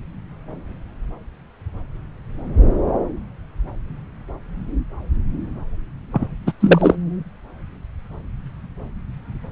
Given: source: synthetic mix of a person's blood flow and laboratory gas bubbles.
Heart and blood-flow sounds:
Doppler ultrasound of blood flow; subclavian vein
6.12-6.27 s: bubbles
6.46-6.52 s: bubbles
6.60-6.96 s: bubbles
From the record:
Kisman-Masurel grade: 213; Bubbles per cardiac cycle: several, 3 to 8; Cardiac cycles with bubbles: 1 to 10%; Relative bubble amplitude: loud (0.450 to 0.775); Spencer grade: 1 (occasional bubble signal discernible with the cardiac motion signal, with majority of cardiac periods free of bubbles); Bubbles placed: anywhere in the cardiac cycle

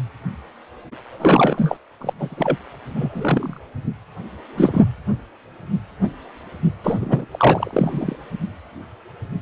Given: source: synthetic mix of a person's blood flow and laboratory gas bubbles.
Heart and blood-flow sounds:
Doppler ultrasound of blood flow; precordium
1.11-1.77 s: bubbles
2.00-2.13 s: bubbles
2.18-2.58 s: bubbles
2.95-3.59 s: bubbles
4.56-4.85 s: bubbles
6.83-7.25 s: bubbles
7.31-8.16 s: bubbles
From the record:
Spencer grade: 2 (many but less than half of the cardiac periods contain bubble signals, singularly or in groups); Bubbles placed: anywhere in the cardiac cycle

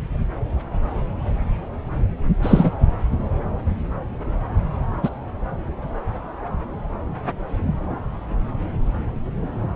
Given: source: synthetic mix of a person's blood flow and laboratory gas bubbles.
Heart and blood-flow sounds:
Doppler ultrasound of blood flow; subclavian vein
2.42-2.71 s: bubbles
5.02-5.09 s: bubbles
From the record:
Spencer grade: 2 (many but less than half of the cardiac periods contain bubble signals, singularly or in groups); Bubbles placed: anywhere in the cardiac cycle

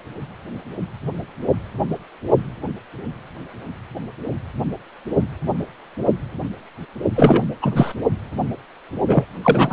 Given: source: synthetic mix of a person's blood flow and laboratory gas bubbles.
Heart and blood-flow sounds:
Doppler ultrasound of blood flow; precordium
7.16-7.46 s: bubbles
7.62-7.93 s: bubbles
9.07-9.25 s: bubbles
9.41-9.73 s: bubbles
From the record:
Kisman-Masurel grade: 223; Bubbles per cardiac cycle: several, 3 to 8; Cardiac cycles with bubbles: 10 to 50%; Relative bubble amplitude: loud (0.450 to 0.775); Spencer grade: 2 (many but less than half of the cardiac periods contain bubble signals, singularly or in groups); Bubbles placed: only in the low amplitude regions of the cardiac cycle

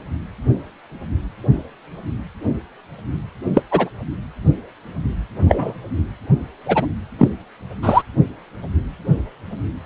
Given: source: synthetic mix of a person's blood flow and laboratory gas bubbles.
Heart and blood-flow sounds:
Doppler ultrasound of blood flow; precordium
3.53-3.62 s: bubbles
3.71-3.89 s: bubbles
5.49-5.74 s: bubbles
6.65-6.86 s: bubbles
7.19-7.29 s: bubbles
7.82-8.03 s: bubbles
From the record:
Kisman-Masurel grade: 123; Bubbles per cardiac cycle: 1 to 2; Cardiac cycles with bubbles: 10 to 50%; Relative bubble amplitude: loud (0.450 to 0.775); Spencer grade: 2 (many but less than half of the cardiac periods contain bubble signals, singularly or in groups); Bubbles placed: anywhere in the cardiac cycle

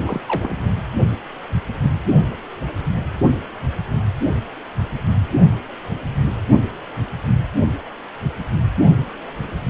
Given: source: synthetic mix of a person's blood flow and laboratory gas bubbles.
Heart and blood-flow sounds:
Doppler ultrasound of blood flow; precordium
0.00-0.23 s: bubbles
0.28-0.66 s: bubbles
From the record:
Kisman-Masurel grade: 211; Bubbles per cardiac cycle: several, 3 to 8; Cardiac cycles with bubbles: 1 to 10%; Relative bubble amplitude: barely perceptible (0.100 to 0.250); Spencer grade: 1 (occasional bubble signal discernible with the cardiac motion signal, with majority of cardiac periods free of bubbles); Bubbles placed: only in the low amplitude regions of the cardiac cycle

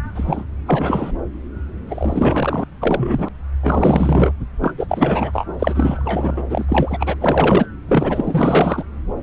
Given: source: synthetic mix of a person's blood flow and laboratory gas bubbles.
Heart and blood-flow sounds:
Doppler ultrasound of blood flow; subclavian vein
0.14-0.44 s: bubbles
0.66-1.11 s: bubbles
1.89-2.66 s: bubbles
2.81-3.29 s: bubbles
3.62-4.33 s: bubbles
4.61-4.73 s: bubbles
4.77-5.46 s: bubbles
5.58-6.44 s: bubbles
6.50-6.65 s: bubbles
6.68-7.16 s: bubbles
7.21-7.66 s: bubbles
7.88-8.83 s: bubbles
From the record:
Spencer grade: 4 (maximum detectable bubble signal sounding continuously throughout systole and diastole of every cardiac period, and overriding the amplitude of the normal cardiac signals); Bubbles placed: anywhere in the cardiac cycle

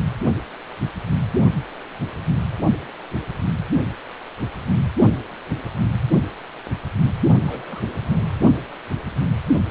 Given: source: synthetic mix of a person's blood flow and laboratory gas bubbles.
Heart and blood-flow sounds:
Doppler ultrasound of blood flow; precordium
7.46-7.82 s: bubbles
8.05-8.37 s: bubbles
From the record:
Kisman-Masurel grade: 211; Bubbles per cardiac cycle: several, 3 to 8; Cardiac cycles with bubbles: 1 to 10%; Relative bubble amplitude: barely perceptible (0.100 to 0.250); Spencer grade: 1 (occasional bubble signal discernible with the cardiac motion signal, with majority of cardiac periods free of bubbles); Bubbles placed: only in the low amplitude regions of the cardiac cycle

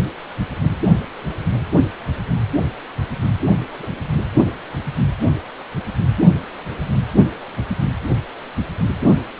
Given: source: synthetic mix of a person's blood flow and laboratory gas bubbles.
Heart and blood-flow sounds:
Doppler ultrasound of blood flow; precordium
3.47-3.56 s: bubbles
3.79-3.88 s: bubbles
From the record:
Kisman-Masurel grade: 111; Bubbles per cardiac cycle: 1 to 2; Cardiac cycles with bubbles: 1 to 10%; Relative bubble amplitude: barely perceptible (0.100 to 0.250); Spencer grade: 1 (occasional bubble signal discernible with the cardiac motion signal, with majority of cardiac periods free of bubbles); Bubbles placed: only in the low amplitude regions of the cardiac cycle

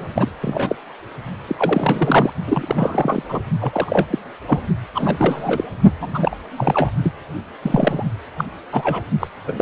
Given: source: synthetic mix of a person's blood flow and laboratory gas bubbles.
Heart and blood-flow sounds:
Doppler ultrasound of blood flow; precordium
0.00-0.29 s: bubbles
0.41-0.76 s: bubbles
1.48-2.30 s: bubbles
2.47-3.22 s: bubbles
3.29-3.40 s: bubbles
3.61-4.06 s: bubbles
4.10-4.18 s: bubbles
4.46-4.60 s: bubbles
4.94-5.64 s: bubbles
6.01-6.35 s: bubbles
6.57-6.90 s: bubbles
7.04-7.13 s: bubbles
7.62-8.05 s: bubbles
8.38-8.45 s: bubbles
8.72-9.02 s: bubbles
9.20-9.28 s: bubbles
9.47-9.61 s: bubbles
From the record:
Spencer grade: 3 (all of the cardiac periods contain showers or single bubble signals, but not dominating or overriding the cardiac motion signals); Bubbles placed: only in the low amplitude regions of the cardiac cycle

